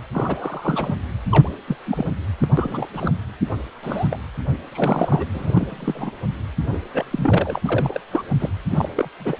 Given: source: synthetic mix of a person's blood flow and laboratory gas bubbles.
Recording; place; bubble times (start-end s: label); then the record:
Doppler ultrasound of blood flow; precordium
0.12-0.95 s: bubbles
1.31-1.50 s: bubbles
1.67-1.76 s: bubbles
1.85-2.08 s: bubbles
2.42-2.48 s: bubbles
2.57-2.86 s: bubbles
2.93-3.12 s: bubbles
3.83-4.07 s: bubbles
4.10-4.18 s: bubbles
4.71-5.26 s: bubbles
5.32-6.11 s: bubbles
6.72-6.79 s: bubbles
6.90-7.61 s: bubbles
7.64-8.01 s: bubbles
8.11-8.23 s: bubbles
8.40-8.50 s: bubbles
8.71-8.89 s: bubbles
8.95-9.09 s: bubbles
9.18-9.38 s: bubbles
From the record:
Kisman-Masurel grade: 232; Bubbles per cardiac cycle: several, 3 to 8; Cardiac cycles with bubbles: 50 to 99%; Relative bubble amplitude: moderate (0.250 to 0.450); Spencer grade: 3 (all of the cardiac periods contain showers or single bubble signals, but not dominating or overriding the cardiac motion signals); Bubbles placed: anywhere in the cardiac cycle